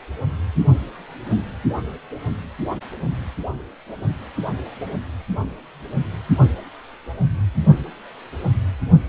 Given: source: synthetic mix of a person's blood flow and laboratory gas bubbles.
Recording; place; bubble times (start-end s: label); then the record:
Doppler ultrasound of blood flow; precordium
no bubbles
From the record:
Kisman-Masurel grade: 000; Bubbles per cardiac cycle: 0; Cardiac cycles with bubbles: 0%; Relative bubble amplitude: no bubbles discernible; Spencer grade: 0 (complete lack of bubble signals)